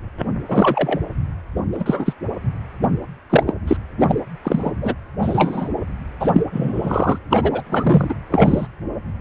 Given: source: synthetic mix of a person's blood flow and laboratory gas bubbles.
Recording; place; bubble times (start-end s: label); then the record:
Doppler ultrasound of blood flow; precordium
0.48-0.99 s: bubbles
1.72-2.14 s: bubbles
3.29-3.44 s: bubbles
3.47-3.54 s: bubbles
3.68-3.77 s: bubbles
4.00-4.19 s: bubbles
4.44-4.72 s: bubbles
4.80-4.94 s: bubbles
5.21-5.69 s: bubbles
6.20-6.42 s: bubbles
6.52-7.18 s: bubbles
7.30-7.62 s: bubbles
7.67-8.15 s: bubbles
8.30-8.67 s: bubbles
From the record:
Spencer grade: 3 (all of the cardiac periods contain showers or single bubble signals, but not dominating or overriding the cardiac motion signals); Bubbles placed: anywhere in the cardiac cycle